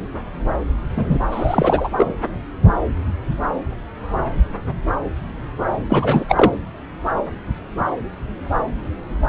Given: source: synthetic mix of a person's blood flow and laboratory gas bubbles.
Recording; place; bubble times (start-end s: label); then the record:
Doppler ultrasound of blood flow; subclavian vein
0.96-1.18 s: bubbles
1.31-1.90 s: bubbles
1.96-2.14 s: bubbles
5.90-6.25 s: bubbles
6.28-6.52 s: bubbles
From the record:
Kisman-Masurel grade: 213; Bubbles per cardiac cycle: several, 3 to 8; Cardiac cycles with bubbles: 1 to 10%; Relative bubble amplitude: loud (0.450 to 0.775); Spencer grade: 1 (occasional bubble signal discernible with the cardiac motion signal, with majority of cardiac periods free of bubbles); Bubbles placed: anywhere in the cardiac cycle